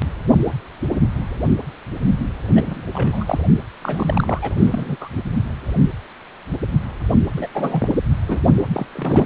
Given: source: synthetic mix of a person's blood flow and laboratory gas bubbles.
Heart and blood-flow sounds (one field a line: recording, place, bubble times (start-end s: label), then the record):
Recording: Doppler ultrasound of blood flow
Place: precordium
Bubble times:
2.48-2.85 s: bubbles
2.92-3.39 s: bubbles
3.81-4.54 s: bubbles
4.58-4.96 s: bubbles
5.00-5.08 s: bubbles
7.36-7.47 s: bubbles
7.54-7.89 s: bubbles
8.28-8.39 s: bubbles
8.56-8.64 s: bubbles
8.73-8.87 s: bubbles
8.95-9.26 s: bubbles
From the record:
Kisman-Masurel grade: 332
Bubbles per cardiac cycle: rolling drumbeat, 9 or more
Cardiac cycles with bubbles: 50 to 99%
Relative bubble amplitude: moderate (0.250 to 0.450)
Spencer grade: 3 (all of the cardiac periods contain showers or single bubble signals, but not dominating or overriding the cardiac motion signals)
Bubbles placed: only in the low amplitude regions of the cardiac cycle